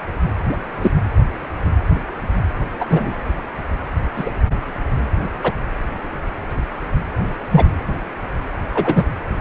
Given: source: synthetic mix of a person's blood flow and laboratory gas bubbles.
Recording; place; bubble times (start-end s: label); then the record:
Doppler ultrasound of blood flow; precordium
0.49-0.57 s: bubbles
0.81-0.91 s: bubbles
2.80-2.85 s: bubbles
2.90-3.18 s: bubbles
4.15-4.31 s: bubbles
5.43-5.52 s: bubbles
7.50-7.65 s: bubbles
8.74-9.05 s: bubbles
From the record:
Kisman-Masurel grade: 123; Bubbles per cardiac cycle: 1 to 2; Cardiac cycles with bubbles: 10 to 50%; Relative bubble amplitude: loud (0.450 to 0.775); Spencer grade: 2 (many but less than half of the cardiac periods contain bubble signals, singularly or in groups); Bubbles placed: anywhere in the cardiac cycle